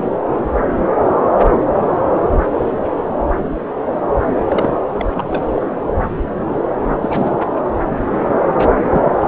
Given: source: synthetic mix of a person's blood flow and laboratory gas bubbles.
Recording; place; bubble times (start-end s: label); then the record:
Doppler ultrasound of blood flow; subclavian vein
4.47-4.77 s: bubbles
4.93-5.43 s: bubbles
5.54-5.67 s: bubbles
6.88-6.97 s: bubbles
7.01-7.37 s: bubbles
8.59-8.67 s: bubbles
8.84-9.25 s: bubbles
From the record:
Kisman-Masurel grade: 222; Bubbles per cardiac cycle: several, 3 to 8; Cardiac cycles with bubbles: 10 to 50%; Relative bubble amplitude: moderate (0.250 to 0.450); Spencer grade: 2 (many but less than half of the cardiac periods contain bubble signals, singularly or in groups); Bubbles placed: anywhere in the cardiac cycle